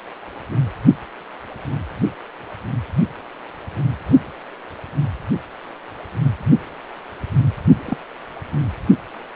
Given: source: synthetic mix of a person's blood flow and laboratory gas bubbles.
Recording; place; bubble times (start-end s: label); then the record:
Doppler ultrasound of blood flow; precordium
7.86-7.97 s: bubbles
From the record:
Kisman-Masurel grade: 112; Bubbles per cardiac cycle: 1 to 2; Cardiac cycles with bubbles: 1 to 10%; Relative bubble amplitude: moderate (0.250 to 0.450); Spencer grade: 1 (occasional bubble signal discernible with the cardiac motion signal, with majority of cardiac periods free of bubbles); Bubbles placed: only in the low amplitude regions of the cardiac cycle